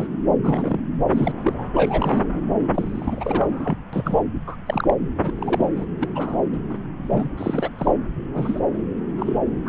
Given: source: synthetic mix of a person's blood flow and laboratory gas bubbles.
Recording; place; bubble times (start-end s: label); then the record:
Doppler ultrasound of blood flow; subclavian vein
0.00-0.07 s: bubbles
0.43-0.79 s: bubbles
1.10-1.32 s: bubbles
1.43-1.53 s: bubbles
1.58-1.64 s: bubbles
1.74-2.24 s: bubbles
2.74-3.78 s: bubbles
3.93-4.20 s: bubbles
4.46-4.57 s: bubbles
4.66-4.94 s: bubbles
5.22-5.31 s: bubbles
5.39-5.68 s: bubbles
5.76-5.86 s: bubbles
5.99-6.08 s: bubbles
6.15-6.37 s: bubbles
6.52-6.58 s: bubbles
6.69-6.79 s: bubbles
7.03-7.29 s: bubbles
7.37-7.70 s: bubbles
7.78-7.93 s: bubbles
8.32-8.61 s: bubbles
9.15-9.37 s: bubbles
9.64-9.69 s: bubbles
From the record:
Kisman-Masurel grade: 242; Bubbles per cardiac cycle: several, 3 to 8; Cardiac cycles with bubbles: 100%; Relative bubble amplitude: moderate (0.250 to 0.450); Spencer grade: 3 (all of the cardiac periods contain showers or single bubble signals, but not dominating or overriding the cardiac motion signals); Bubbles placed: anywhere in the cardiac cycle